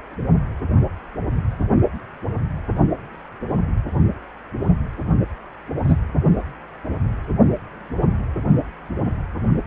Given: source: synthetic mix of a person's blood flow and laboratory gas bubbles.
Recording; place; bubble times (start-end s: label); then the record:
Doppler ultrasound of blood flow; precordium
5.83-5.97 s: bubbles
From the record:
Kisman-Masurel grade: 113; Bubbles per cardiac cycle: 1 to 2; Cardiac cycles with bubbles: 1 to 10%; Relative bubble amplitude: loud (0.450 to 0.775); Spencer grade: 1 (occasional bubble signal discernible with the cardiac motion signal, with majority of cardiac periods free of bubbles); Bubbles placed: only in the low amplitude regions of the cardiac cycle